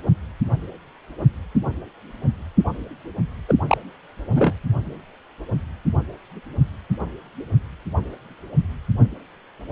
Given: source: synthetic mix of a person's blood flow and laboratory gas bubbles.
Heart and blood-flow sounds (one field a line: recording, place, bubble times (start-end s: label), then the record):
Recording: Doppler ultrasound of blood flow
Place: precordium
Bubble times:
3.49-3.55 s: bubbles
3.67-3.78 s: bubbles
4.30-4.54 s: bubbles
From the record:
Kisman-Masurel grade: 212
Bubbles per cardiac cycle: several, 3 to 8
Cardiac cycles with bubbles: 1 to 10%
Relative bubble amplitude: moderate (0.250 to 0.450)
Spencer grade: 1 (occasional bubble signal discernible with the cardiac motion signal, with majority of cardiac periods free of bubbles)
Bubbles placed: anywhere in the cardiac cycle